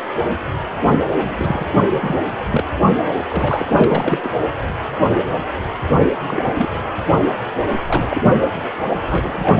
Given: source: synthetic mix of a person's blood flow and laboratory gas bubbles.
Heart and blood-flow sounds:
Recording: Doppler ultrasound of blood flow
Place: precordium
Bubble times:
0.89-0.99 s: bubbles
1.14-1.66 s: bubbles
1.90-2.18 s: bubbles
2.50-2.64 s: bubbles
3.29-3.66 s: bubbles
3.80-4.19 s: bubbles
4.24-4.31 s: bubbles
6.28-6.69 s: bubbles
6.74-6.79 s: bubbles
7.87-8.07 s: bubbles
8.10-8.36 s: bubbles
9.08-9.56 s: bubbles
From the record:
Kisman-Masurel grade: 232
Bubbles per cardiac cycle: several, 3 to 8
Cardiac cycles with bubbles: 50 to 99%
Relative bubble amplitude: moderate (0.250 to 0.450)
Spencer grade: 3 (all of the cardiac periods contain showers or single bubble signals, but not dominating or overriding the cardiac motion signals)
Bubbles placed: anywhere in the cardiac cycle

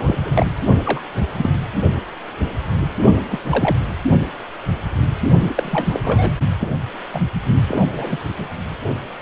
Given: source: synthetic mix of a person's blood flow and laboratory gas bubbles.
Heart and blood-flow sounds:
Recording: Doppler ultrasound of blood flow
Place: precordium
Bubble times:
0.00-0.46 s: bubbles
0.84-1.01 s: bubbles
1.36-1.50 s: bubbles
3.29-3.40 s: bubbles
3.50-3.77 s: bubbles
5.38-6.00 s: bubbles
6.04-6.31 s: bubbles
6.59-6.68 s: bubbles
7.12-7.21 s: bubbles
7.68-7.87 s: bubbles
7.92-8.21 s: bubbles
8.29-8.33 s: bubbles
8.37-8.46 s: bubbles
From the record:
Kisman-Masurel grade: 232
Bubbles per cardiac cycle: several, 3 to 8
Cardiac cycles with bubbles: 50 to 99%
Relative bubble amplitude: moderate (0.250 to 0.450)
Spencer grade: 3 (all of the cardiac periods contain showers or single bubble signals, but not dominating or overriding the cardiac motion signals)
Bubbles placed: only in the low amplitude regions of the cardiac cycle

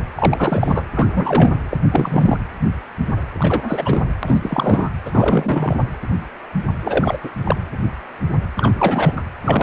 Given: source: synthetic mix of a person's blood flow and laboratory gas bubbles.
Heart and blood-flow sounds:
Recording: Doppler ultrasound of blood flow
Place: precordium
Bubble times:
0.00-0.03 s: bubbles
0.15-0.86 s: bubbles
0.94-1.53 s: bubbles
1.70-1.77 s: bubbles
1.91-2.37 s: bubbles
3.38-4.02 s: bubbles
4.22-4.39 s: bubbles
4.42-4.91 s: bubbles
5.05-5.76 s: bubbles
6.83-7.17 s: bubbles
7.23-7.30 s: bubbles
7.44-7.56 s: bubbles
8.57-9.13 s: bubbles
9.16-9.22 s: bubbles
9.41-9.63 s: bubbles
From the record:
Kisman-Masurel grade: 333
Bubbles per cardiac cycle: rolling drumbeat, 9 or more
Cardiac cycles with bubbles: 50 to 99%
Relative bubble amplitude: loud (0.450 to 0.775)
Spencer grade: 3 (all of the cardiac periods contain showers or single bubble signals, but not dominating or overriding the cardiac motion signals)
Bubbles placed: anywhere in the cardiac cycle

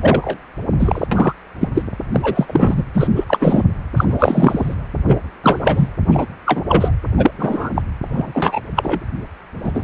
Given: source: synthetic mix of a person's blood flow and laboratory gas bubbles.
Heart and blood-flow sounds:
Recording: Doppler ultrasound of blood flow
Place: precordium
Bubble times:
0.01-0.37 s: bubbles
0.79-1.06 s: bubbles
1.11-1.33 s: bubbles
1.60-1.68 s: bubbles
1.75-1.83 s: bubbles
2.12-2.83 s: bubbles
2.94-3.07 s: bubbles
3.15-3.25 s: bubbles
3.27-3.63 s: bubbles
3.96-4.04 s: bubbles
4.09-4.74 s: bubbles
5.08-5.17 s: bubbles
5.43-5.91 s: bubbles
6.08-6.27 s: bubbles
6.46-6.63 s: bubbles
6.68-6.91 s: bubbles
7.17-7.31 s: bubbles
7.38-7.70 s: bubbles
7.75-7.82 s: bubbles
8.08-8.61 s: bubbles
8.76-9.00 s: bubbles
9.64-9.84 s: bubbles
From the record:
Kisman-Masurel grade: 243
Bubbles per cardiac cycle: several, 3 to 8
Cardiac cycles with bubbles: 100%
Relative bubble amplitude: loud (0.450 to 0.775)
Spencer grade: 3 (all of the cardiac periods contain showers or single bubble signals, but not dominating or overriding the cardiac motion signals)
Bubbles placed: anywhere in the cardiac cycle

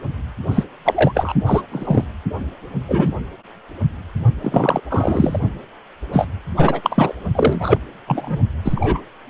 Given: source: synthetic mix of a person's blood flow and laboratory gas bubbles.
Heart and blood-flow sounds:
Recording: Doppler ultrasound of blood flow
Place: precordium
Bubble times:
0.51-0.64 s: bubbles
0.84-1.34 s: bubbles
1.46-1.62 s: bubbles
1.72-2.04 s: bubbles
2.88-3.13 s: bubbles
4.42-4.80 s: bubbles
4.89-5.40 s: bubbles
6.12-6.27 s: bubbles
6.56-7.15 s: bubbles
7.35-7.78 s: bubbles
8.06-8.38 s: bubbles
8.64-9.01 s: bubbles
From the record:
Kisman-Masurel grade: 243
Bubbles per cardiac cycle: several, 3 to 8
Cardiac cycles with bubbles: 100%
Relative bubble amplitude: loud (0.450 to 0.775)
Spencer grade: 3 (all of the cardiac periods contain showers or single bubble signals, but not dominating or overriding the cardiac motion signals)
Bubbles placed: only in the low amplitude regions of the cardiac cycle

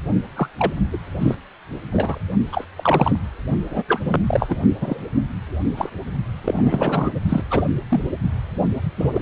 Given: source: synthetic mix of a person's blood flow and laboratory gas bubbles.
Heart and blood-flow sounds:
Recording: Doppler ultrasound of blood flow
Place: precordium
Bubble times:
0.35-0.49 s: bubbles
0.58-0.72 s: bubbles
0.92-0.97 s: bubbles
1.21-1.35 s: bubbles
1.92-2.19 s: bubbles
2.52-2.65 s: bubbles
2.76-3.16 s: bubbles
3.70-3.83 s: bubbles
3.88-4.00 s: bubbles
4.04-4.24 s: bubbles
4.26-4.59 s: bubbles
4.80-4.98 s: bubbles
5.76-5.90 s: bubbles
6.44-7.11 s: bubbles
7.29-7.42 s: bubbles
7.50-7.65 s: bubbles
7.90-8.02 s: bubbles
8.98-9.22 s: bubbles
From the record:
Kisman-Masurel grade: 243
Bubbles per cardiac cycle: several, 3 to 8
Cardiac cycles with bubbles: 100%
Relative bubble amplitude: loud (0.450 to 0.775)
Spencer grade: 3 (all of the cardiac periods contain showers or single bubble signals, but not dominating or overriding the cardiac motion signals)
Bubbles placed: only in the low amplitude regions of the cardiac cycle

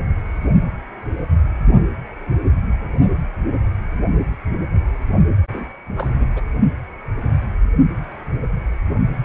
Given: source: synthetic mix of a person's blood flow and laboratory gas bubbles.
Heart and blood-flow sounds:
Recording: Doppler ultrasound of blood flow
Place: precordium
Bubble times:
5.53-5.69 s: bubbles
5.96-6.29 s: bubbles
6.36-6.42 s: bubbles
From the record:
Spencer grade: 2 (many but less than half of the cardiac periods contain bubble signals, singularly or in groups)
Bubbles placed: only in the low amplitude regions of the cardiac cycle

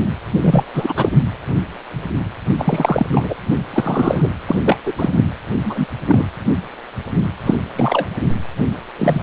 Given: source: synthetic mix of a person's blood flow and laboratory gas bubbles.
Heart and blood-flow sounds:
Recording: Doppler ultrasound of blood flow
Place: precordium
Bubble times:
0.40-0.66 s: bubbles
0.73-1.09 s: bubbles
2.58-3.06 s: bubbles
3.12-3.35 s: bubbles
3.51-3.57 s: bubbles
3.73-4.29 s: bubbles
4.46-4.61 s: bubbles
4.65-4.78 s: bubbles
4.86-4.92 s: bubbles
4.98-5.23 s: bubbles
5.63-5.87 s: bubbles
6.07-6.25 s: bubbles
7.46-7.55 s: bubbles
7.75-8.07 s: bubbles
8.97-9.23 s: bubbles
From the record:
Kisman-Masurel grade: 233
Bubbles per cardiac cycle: several, 3 to 8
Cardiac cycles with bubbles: 50 to 99%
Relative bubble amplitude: loud (0.450 to 0.775)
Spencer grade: 3 (all of the cardiac periods contain showers or single bubble signals, but not dominating or overriding the cardiac motion signals)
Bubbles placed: anywhere in the cardiac cycle

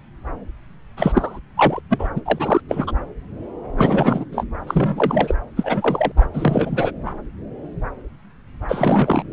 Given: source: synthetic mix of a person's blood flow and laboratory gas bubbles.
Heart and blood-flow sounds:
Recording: Doppler ultrasound of blood flow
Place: subclavian vein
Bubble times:
0.96-1.40 s: bubbles
1.56-1.81 s: bubbles
1.90-2.08 s: bubbles
2.15-2.22 s: bubbles
2.25-2.61 s: bubbles
2.69-2.93 s: bubbles
3.77-4.25 s: bubbles
4.31-4.44 s: bubbles
4.67-5.35 s: bubbles
5.56-6.12 s: bubbles
6.17-6.27 s: bubbles
6.33-6.92 s: bubbles
7.05-7.13 s: bubbles
8.68-9.23 s: bubbles
From the record:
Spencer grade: 3 (all of the cardiac periods contain showers or single bubble signals, but not dominating or overriding the cardiac motion signals)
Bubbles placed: anywhere in the cardiac cycle

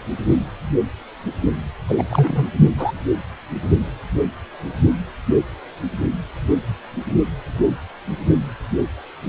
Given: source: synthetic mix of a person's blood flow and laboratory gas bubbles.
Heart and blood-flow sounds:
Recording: Doppler ultrasound of blood flow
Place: precordium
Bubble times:
1.88-2.04 s: bubbles
2.10-2.45 s: bubbles
2.77-2.92 s: bubbles
From the record:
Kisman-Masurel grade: 212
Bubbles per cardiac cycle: several, 3 to 8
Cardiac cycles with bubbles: 1 to 10%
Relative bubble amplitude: moderate (0.250 to 0.450)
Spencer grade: 1 (occasional bubble signal discernible with the cardiac motion signal, with majority of cardiac periods free of bubbles)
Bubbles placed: anywhere in the cardiac cycle

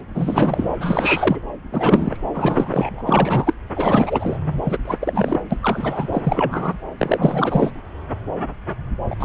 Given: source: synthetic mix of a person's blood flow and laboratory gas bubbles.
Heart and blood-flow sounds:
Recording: Doppler ultrasound of blood flow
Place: subclavian vein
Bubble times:
0.14-0.76 s: bubbles
0.80-1.40 s: bubbles
1.71-2.17 s: bubbles
2.34-3.01 s: bubbles
3.06-3.53 s: bubbles
3.76-4.38 s: bubbles
4.64-4.78 s: bubbles
4.84-5.40 s: bubbles
5.50-5.57 s: bubbles
5.60-6.07 s: bubbles
6.12-6.77 s: bubbles
6.97-7.71 s: bubbles
9.10-9.15 s: bubbles
9.20-9.25 s: bubbles
From the record:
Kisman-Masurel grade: 333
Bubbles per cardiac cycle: rolling drumbeat, 9 or more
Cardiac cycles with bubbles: 50 to 99%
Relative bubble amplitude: loud (0.450 to 0.775)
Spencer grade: 3 (all of the cardiac periods contain showers or single bubble signals, but not dominating or overriding the cardiac motion signals)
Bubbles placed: anywhere in the cardiac cycle

